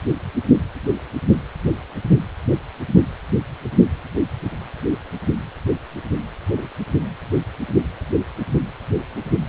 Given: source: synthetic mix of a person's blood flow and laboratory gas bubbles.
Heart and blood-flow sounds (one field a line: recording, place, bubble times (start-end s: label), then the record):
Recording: Doppler ultrasound of blood flow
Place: precordium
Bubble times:
6.51-6.69 s: bubbles
From the record:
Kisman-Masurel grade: 121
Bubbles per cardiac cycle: 1 to 2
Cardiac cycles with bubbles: 10 to 50%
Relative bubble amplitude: barely perceptible (0.100 to 0.250)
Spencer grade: 2 (many but less than half of the cardiac periods contain bubble signals, singularly or in groups)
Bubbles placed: anywhere in the cardiac cycle